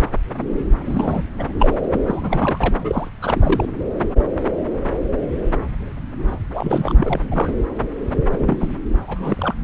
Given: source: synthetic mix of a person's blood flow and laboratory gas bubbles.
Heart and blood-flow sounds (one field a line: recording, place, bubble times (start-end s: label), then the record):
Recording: Doppler ultrasound of blood flow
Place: subclavian vein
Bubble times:
0.85-1.23 s: bubbles
1.39-1.44 s: bubbles
1.59-1.73 s: bubbles
1.92-2.01 s: bubbles
2.07-2.74 s: bubbles
2.78-3.10 s: bubbles
3.21-3.67 s: bubbles
6.30-6.37 s: bubbles
6.52-6.93 s: bubbles
6.96-7.19 s: bubbles
7.30-7.53 s: bubbles
8.32-8.77 s: bubbles
9.08-9.54 s: bubbles
From the record:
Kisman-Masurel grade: 232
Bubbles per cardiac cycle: several, 3 to 8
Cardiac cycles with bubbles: 50 to 99%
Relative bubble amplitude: moderate (0.250 to 0.450)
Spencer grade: 3 (all of the cardiac periods contain showers or single bubble signals, but not dominating or overriding the cardiac motion signals)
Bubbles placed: anywhere in the cardiac cycle